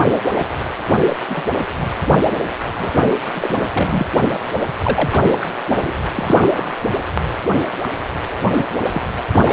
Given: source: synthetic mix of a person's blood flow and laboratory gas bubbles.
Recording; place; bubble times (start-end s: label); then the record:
Doppler ultrasound of blood flow; precordium
0.36-0.46 s: bubbles
1.08-1.17 s: bubbles
1.28-1.48 s: bubbles
1.80-1.83 s: bubbles
2.75-3.16 s: bubbles
3.35-4.06 s: bubbles
4.82-5.46 s: bubbles
5.68-5.93 s: bubbles
6.14-6.74 s: bubbles
7.83-7.88 s: bubbles
8.56-8.65 s: bubbles
8.91-9.02 s: bubbles
9.34-9.53 s: bubbles
From the record:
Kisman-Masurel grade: 242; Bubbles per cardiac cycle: several, 3 to 8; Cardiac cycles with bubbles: 100%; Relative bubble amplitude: moderate (0.250 to 0.450); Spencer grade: 3 (all of the cardiac periods contain showers or single bubble signals, but not dominating or overriding the cardiac motion signals); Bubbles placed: anywhere in the cardiac cycle